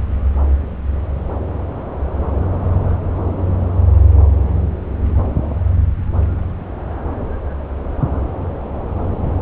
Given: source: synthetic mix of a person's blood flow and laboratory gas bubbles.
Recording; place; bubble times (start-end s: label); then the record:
Doppler ultrasound of blood flow; subclavian vein
9.12-9.29 s: bubbles
From the record:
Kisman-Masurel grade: 111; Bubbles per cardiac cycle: 1 to 2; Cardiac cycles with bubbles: 1 to 10%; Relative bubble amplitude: barely perceptible (0.100 to 0.250); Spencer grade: 1 (occasional bubble signal discernible with the cardiac motion signal, with majority of cardiac periods free of bubbles); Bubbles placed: anywhere in the cardiac cycle